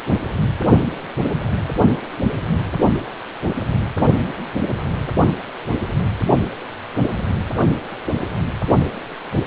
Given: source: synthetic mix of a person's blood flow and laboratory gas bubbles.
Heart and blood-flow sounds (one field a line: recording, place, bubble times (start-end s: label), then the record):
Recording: Doppler ultrasound of blood flow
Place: precordium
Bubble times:
no bubbles
From the record:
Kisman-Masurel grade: 000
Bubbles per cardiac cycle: 0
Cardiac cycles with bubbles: 0%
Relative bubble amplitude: no bubbles discernible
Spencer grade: 0 (complete lack of bubble signals)